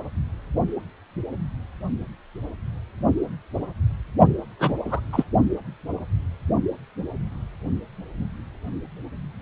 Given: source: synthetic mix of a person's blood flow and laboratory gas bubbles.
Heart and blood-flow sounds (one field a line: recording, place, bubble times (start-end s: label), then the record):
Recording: Doppler ultrasound of blood flow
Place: precordium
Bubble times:
4.59-4.74 s: bubbles
4.84-5.00 s: bubbles
5.12-5.25 s: bubbles
From the record:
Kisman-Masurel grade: 212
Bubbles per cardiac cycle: several, 3 to 8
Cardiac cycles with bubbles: 1 to 10%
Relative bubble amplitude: moderate (0.250 to 0.450)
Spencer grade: 1 (occasional bubble signal discernible with the cardiac motion signal, with majority of cardiac periods free of bubbles)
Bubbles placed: only in the low amplitude regions of the cardiac cycle